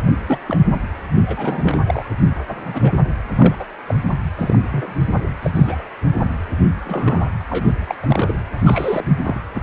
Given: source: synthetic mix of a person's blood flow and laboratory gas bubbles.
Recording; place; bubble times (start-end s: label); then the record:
Doppler ultrasound of blood flow; precordium
0.27-0.38 s: bubbles
0.47-0.61 s: bubbles
1.22-1.81 s: bubbles
1.86-2.04 s: bubbles
2.49-2.93 s: bubbles
3.37-3.55 s: bubbles
3.59-3.65 s: bubbles
3.87-3.94 s: bubbles
4.35-4.58 s: bubbles
4.62-4.67 s: bubbles
4.72-4.93 s: bubbles
5.42-5.51 s: bubbles
5.54-5.83 s: bubbles
6.85-7.30 s: bubbles
7.49-7.73 s: bubbles
7.88-7.95 s: bubbles
8.02-8.34 s: bubbles
8.65-9.08 s: bubbles
9.24-9.39 s: bubbles
9.55-9.63 s: bubbles
From the record:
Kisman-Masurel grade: 232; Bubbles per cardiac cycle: several, 3 to 8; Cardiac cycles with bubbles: 50 to 99%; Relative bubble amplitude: moderate (0.250 to 0.450); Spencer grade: 3 (all of the cardiac periods contain showers or single bubble signals, but not dominating or overriding the cardiac motion signals); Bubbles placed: anywhere in the cardiac cycle